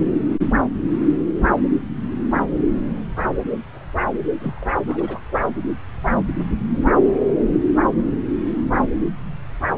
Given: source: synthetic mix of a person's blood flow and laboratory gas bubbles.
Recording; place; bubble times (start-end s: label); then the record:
Doppler ultrasound of blood flow; subclavian vein
0.00-0.08 s: bubbles
4.39-4.54 s: bubbles
4.57-4.67 s: bubbles
4.86-5.21 s: bubbles
From the record:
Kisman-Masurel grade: 221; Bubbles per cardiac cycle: several, 3 to 8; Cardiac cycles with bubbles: 10 to 50%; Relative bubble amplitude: barely perceptible (0.100 to 0.250); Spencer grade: 2 (many but less than half of the cardiac periods contain bubble signals, singularly or in groups); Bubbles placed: anywhere in the cardiac cycle